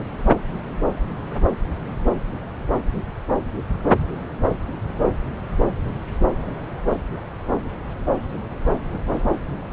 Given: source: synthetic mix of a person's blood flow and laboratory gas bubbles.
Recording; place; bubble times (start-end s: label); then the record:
Doppler ultrasound of blood flow; subclavian vein
no bubbles
From the record:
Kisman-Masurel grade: 000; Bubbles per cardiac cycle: 0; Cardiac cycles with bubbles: 0%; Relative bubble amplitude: no bubbles discernible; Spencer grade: 0 (complete lack of bubble signals)